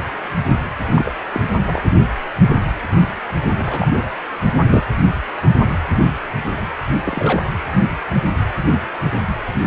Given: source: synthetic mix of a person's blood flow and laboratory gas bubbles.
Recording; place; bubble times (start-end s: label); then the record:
Doppler ultrasound of blood flow; precordium
0.94-1.12 s: bubbles
1.33-1.42 s: bubbles
1.63-1.81 s: bubbles
3.59-3.88 s: bubbles
3.94-4.04 s: bubbles
4.63-4.83 s: bubbles
7.04-7.44 s: bubbles
From the record:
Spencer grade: 2 (many but less than half of the cardiac periods contain bubble signals, singularly or in groups); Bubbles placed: anywhere in the cardiac cycle